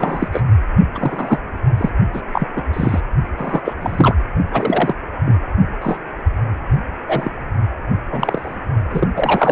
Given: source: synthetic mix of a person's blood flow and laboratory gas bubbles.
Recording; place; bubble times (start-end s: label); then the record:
Doppler ultrasound of blood flow; precordium
0.00-0.28 s: bubbles
0.32-0.42 s: bubbles
0.94-1.39 s: bubbles
1.77-1.90 s: bubbles
2.13-2.21 s: bubbles
2.33-2.48 s: bubbles
2.56-2.63 s: bubbles
2.73-3.00 s: bubbles
3.37-3.61 s: bubbles
3.65-3.73 s: bubbles
3.81-4.16 s: bubbles
4.52-4.95 s: bubbles
5.26-5.35 s: bubbles
5.81-5.97 s: bubbles
7.08-7.30 s: bubbles
8.12-8.57 s: bubbles
8.91-9.08 s: bubbles
9.16-9.52 s: bubbles
From the record:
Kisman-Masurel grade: 243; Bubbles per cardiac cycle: several, 3 to 8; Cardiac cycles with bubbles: 100%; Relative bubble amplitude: loud (0.450 to 0.775); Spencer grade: 3 (all of the cardiac periods contain showers or single bubble signals, but not dominating or overriding the cardiac motion signals); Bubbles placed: only in the low amplitude regions of the cardiac cycle